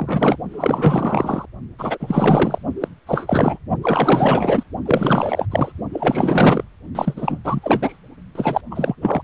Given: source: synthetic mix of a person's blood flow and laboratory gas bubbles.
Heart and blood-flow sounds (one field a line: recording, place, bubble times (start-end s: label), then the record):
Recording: Doppler ultrasound of blood flow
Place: precordium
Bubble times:
0.00-0.36 s: bubbles
0.53-1.46 s: bubbles
1.79-2.58 s: bubbles
2.80-2.88 s: bubbles
3.06-3.58 s: bubbles
3.82-4.63 s: bubbles
4.85-5.47 s: bubbles
5.50-5.72 s: bubbles
5.92-6.64 s: bubbles
6.95-7.38 s: bubbles
7.44-7.98 s: bubbles
8.35-8.61 s: bubbles
8.71-8.96 s: bubbles
9.01-9.24 s: bubbles
From the record:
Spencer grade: 4 (maximum detectable bubble signal sounding continuously throughout systole and diastole of every cardiac period, and overriding the amplitude of the normal cardiac signals)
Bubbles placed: only in the low amplitude regions of the cardiac cycle